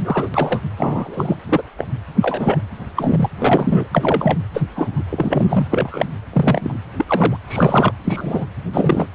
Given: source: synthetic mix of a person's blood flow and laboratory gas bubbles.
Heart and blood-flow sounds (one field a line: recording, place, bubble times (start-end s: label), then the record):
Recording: Doppler ultrasound of blood flow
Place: precordium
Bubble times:
0.00-0.27 s: bubbles
0.34-0.60 s: bubbles
0.77-1.36 s: bubbles
1.49-1.62 s: bubbles
1.77-1.88 s: bubbles
2.21-2.62 s: bubbles
2.96-3.29 s: bubbles
3.39-3.87 s: bubbles
3.92-4.38 s: bubbles
4.54-4.62 s: bubbles
4.75-4.90 s: bubbles
4.96-5.03 s: bubbles
5.10-6.05 s: bubbles
6.33-6.79 s: bubbles
6.97-7.04 s: bubbles
7.07-7.37 s: bubbles
7.47-7.92 s: bubbles
8.04-8.46 s: bubbles
8.73-9.06 s: bubbles
From the record:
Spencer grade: 3 (all of the cardiac periods contain showers or single bubble signals, but not dominating or overriding the cardiac motion signals)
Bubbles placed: anywhere in the cardiac cycle